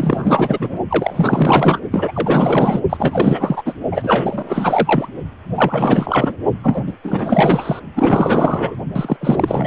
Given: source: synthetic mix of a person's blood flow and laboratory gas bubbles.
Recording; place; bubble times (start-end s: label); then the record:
Doppler ultrasound of blood flow; precordium
0.00-0.78 s: bubbles
0.89-1.81 s: bubbles
1.92-2.81 s: bubbles
2.89-3.73 s: bubbles
3.92-5.08 s: bubbles
5.54-6.37 s: bubbles
6.62-6.93 s: bubbles
7.03-7.79 s: bubbles
7.95-8.75 s: bubbles
8.94-9.17 s: bubbles
9.21-9.67 s: bubbles
From the record:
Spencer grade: 4 (maximum detectable bubble signal sounding continuously throughout systole and diastole of every cardiac period, and overriding the amplitude of the normal cardiac signals); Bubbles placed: only in the low amplitude regions of the cardiac cycle